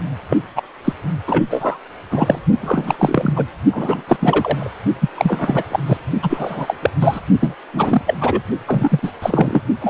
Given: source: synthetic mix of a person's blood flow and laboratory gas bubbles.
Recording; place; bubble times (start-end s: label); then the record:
Doppler ultrasound of blood flow; precordium
0.29-0.36 s: bubbles
0.55-0.62 s: bubbles
0.84-0.93 s: bubbles
1.27-1.45 s: bubbles
1.50-1.78 s: bubbles
2.11-2.39 s: bubbles
2.61-3.46 s: bubbles
3.72-4.03 s: bubbles
4.08-4.17 s: bubbles
4.20-4.71 s: bubbles
5.00-5.09 s: bubbles
5.17-5.63 s: bubbles
5.71-5.79 s: bubbles
5.86-5.97 s: bubbles
6.22-6.76 s: bubbles
6.82-6.90 s: bubbles
7.00-7.21 s: bubbles
7.39-7.54 s: bubbles
7.73-8.02 s: bubbles
8.06-8.15 s: bubbles
8.21-8.41 s: bubbles
8.68-8.99 s: bubbles
9.02-9.12 s: bubbles
9.22-9.62 s: bubbles
9.81-9.90 s: bubbles
From the record:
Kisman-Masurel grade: 343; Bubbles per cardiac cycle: rolling drumbeat, 9 or more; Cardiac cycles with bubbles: 100%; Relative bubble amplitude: loud (0.450 to 0.775); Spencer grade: 3 (all of the cardiac periods contain showers or single bubble signals, but not dominating or overriding the cardiac motion signals); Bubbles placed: only in the low amplitude regions of the cardiac cycle